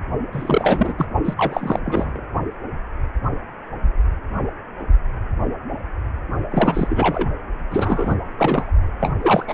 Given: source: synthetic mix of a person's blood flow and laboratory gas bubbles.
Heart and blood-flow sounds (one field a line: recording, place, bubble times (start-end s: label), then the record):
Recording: Doppler ultrasound of blood flow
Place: precordium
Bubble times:
0.32-0.95 s: bubbles
0.98-1.06 s: bubbles
1.25-1.34 s: bubbles
1.37-1.79 s: bubbles
1.84-2.20 s: bubbles
6.51-7.28 s: bubbles
7.70-8.16 s: bubbles
8.38-8.71 s: bubbles
8.99-9.13 s: bubbles
9.21-9.54 s: bubbles
From the record:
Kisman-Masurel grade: 333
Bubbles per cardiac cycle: rolling drumbeat, 9 or more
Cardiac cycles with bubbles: 50 to 99%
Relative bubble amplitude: loud (0.450 to 0.775)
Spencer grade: 3 (all of the cardiac periods contain showers or single bubble signals, but not dominating or overriding the cardiac motion signals)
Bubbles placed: only in the low amplitude regions of the cardiac cycle